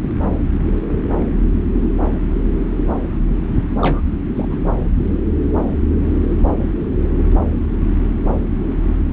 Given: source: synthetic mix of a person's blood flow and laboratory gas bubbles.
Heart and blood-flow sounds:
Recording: Doppler ultrasound of blood flow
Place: subclavian vein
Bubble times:
3.81-4.01 s: bubbles
4.35-4.60 s: bubbles
From the record:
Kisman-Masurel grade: 212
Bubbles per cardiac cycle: several, 3 to 8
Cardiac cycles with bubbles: 1 to 10%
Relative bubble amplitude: moderate (0.250 to 0.450)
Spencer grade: 1 (occasional bubble signal discernible with the cardiac motion signal, with majority of cardiac periods free of bubbles)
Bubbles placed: anywhere in the cardiac cycle

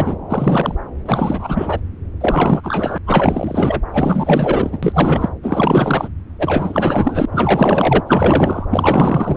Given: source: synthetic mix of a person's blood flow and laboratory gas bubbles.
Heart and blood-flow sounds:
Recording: Doppler ultrasound of blood flow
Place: subclavian vein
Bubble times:
0.00-0.16 s: bubbles
0.29-0.75 s: bubbles
1.06-1.81 s: bubbles
2.21-2.98 s: bubbles
3.06-3.81 s: bubbles
3.93-4.78 s: bubbles
4.82-5.29 s: bubbles
5.42-6.08 s: bubbles
6.38-7.25 s: bubbles
7.31-8.00 s: bubbles
8.06-8.66 s: bubbles
8.71-9.37 s: bubbles
From the record:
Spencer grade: 4 (maximum detectable bubble signal sounding continuously throughout systole and diastole of every cardiac period, and overriding the amplitude of the normal cardiac signals)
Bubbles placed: anywhere in the cardiac cycle

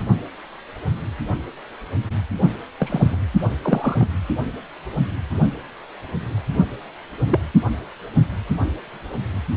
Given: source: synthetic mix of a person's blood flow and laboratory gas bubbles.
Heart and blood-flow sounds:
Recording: Doppler ultrasound of blood flow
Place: precordium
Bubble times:
0.00-0.03 s: bubbles
2.79-3.16 s: bubbles
3.62-4.07 s: bubbles
7.28-7.39 s: bubbles
From the record:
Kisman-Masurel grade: 122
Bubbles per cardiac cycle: 1 to 2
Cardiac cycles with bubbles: 10 to 50%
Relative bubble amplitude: moderate (0.250 to 0.450)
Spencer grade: 2 (many but less than half of the cardiac periods contain bubble signals, singularly or in groups)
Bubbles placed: only in the low amplitude regions of the cardiac cycle

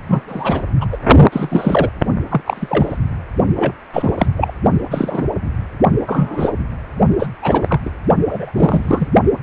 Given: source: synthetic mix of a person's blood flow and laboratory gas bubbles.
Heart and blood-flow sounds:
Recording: Doppler ultrasound of blood flow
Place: precordium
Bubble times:
0.08-0.23 s: bubbles
0.28-0.61 s: bubbles
0.80-0.86 s: bubbles
0.92-0.98 s: bubbles
1.32-1.89 s: bubbles
2.29-2.42 s: bubbles
2.46-2.99 s: bubbles
3.56-3.72 s: bubbles
3.93-4.14 s: bubbles
4.17-4.26 s: bubbles
4.37-4.52 s: bubbles
4.90-5.25 s: bubbles
6.06-6.52 s: bubbles
7.19-7.27 s: bubbles
7.42-7.80 s: bubbles
7.85-7.90 s: bubbles
8.30-8.52 s: bubbles
8.55-9.08 s: bubbles
From the record:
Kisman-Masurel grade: 243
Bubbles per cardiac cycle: several, 3 to 8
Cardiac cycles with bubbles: 100%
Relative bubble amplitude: loud (0.450 to 0.775)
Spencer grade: 3 (all of the cardiac periods contain showers or single bubble signals, but not dominating or overriding the cardiac motion signals)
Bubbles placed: only in the low amplitude regions of the cardiac cycle

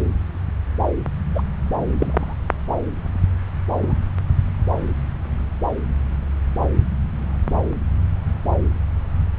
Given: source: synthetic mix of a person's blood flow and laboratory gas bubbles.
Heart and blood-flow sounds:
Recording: Doppler ultrasound of blood flow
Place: subclavian vein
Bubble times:
1.35-1.42 s: bubbles
1.98-2.34 s: bubbles
3.81-3.93 s: bubbles
From the record:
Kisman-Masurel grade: 122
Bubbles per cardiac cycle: 1 to 2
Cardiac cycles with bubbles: 10 to 50%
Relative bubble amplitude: moderate (0.250 to 0.450)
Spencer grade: 2 (many but less than half of the cardiac periods contain bubble signals, singularly or in groups)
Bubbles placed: anywhere in the cardiac cycle

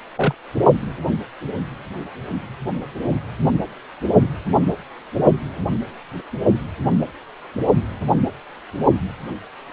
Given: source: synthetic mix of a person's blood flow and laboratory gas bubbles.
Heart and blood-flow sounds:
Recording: Doppler ultrasound of blood flow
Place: precordium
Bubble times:
0.17-0.35 s: bubbles
From the record:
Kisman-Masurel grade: 122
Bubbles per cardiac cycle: 1 to 2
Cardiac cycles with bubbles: 10 to 50%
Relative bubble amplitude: moderate (0.250 to 0.450)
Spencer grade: 2 (many but less than half of the cardiac periods contain bubble signals, singularly or in groups)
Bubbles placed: only in the low amplitude regions of the cardiac cycle

